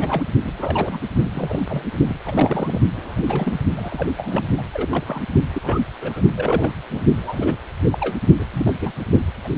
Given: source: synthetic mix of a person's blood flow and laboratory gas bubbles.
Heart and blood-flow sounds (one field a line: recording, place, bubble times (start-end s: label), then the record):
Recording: Doppler ultrasound of blood flow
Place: precordium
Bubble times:
0.00-0.23 s: bubbles
0.44-0.99 s: bubbles
1.23-1.30 s: bubbles
1.33-1.61 s: bubbles
1.69-1.82 s: bubbles
2.08-2.16 s: bubbles
2.25-2.81 s: bubbles
2.94-3.60 s: bubbles
3.76-4.13 s: bubbles
4.16-4.46 s: bubbles
4.57-4.62 s: bubbles
4.73-5.04 s: bubbles
5.06-5.24 s: bubbles
5.54-5.80 s: bubbles
6.00-6.22 s: bubbles
6.35-6.71 s: bubbles
6.91-7.00 s: bubbles
7.17-7.55 s: bubbles
7.92-8.19 s: bubbles
8.39-8.45 s: bubbles
8.52-8.73 s: bubbles
8.80-8.92 s: bubbles
9.45-9.49 s: bubbles
From the record:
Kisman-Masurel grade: 242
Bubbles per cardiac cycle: several, 3 to 8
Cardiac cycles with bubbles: 100%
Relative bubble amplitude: moderate (0.250 to 0.450)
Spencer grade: 3 (all of the cardiac periods contain showers or single bubble signals, but not dominating or overriding the cardiac motion signals)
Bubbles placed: only in the low amplitude regions of the cardiac cycle